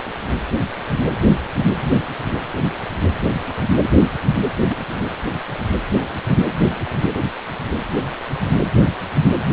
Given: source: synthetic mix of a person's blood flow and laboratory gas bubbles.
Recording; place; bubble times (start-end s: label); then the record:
Doppler ultrasound of blood flow; precordium
4.55-4.77 s: bubbles
From the record:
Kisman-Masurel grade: 111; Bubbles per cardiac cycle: 1 to 2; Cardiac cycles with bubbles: 1 to 10%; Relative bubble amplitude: barely perceptible (0.100 to 0.250); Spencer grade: 1 (occasional bubble signal discernible with the cardiac motion signal, with majority of cardiac periods free of bubbles); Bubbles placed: anywhere in the cardiac cycle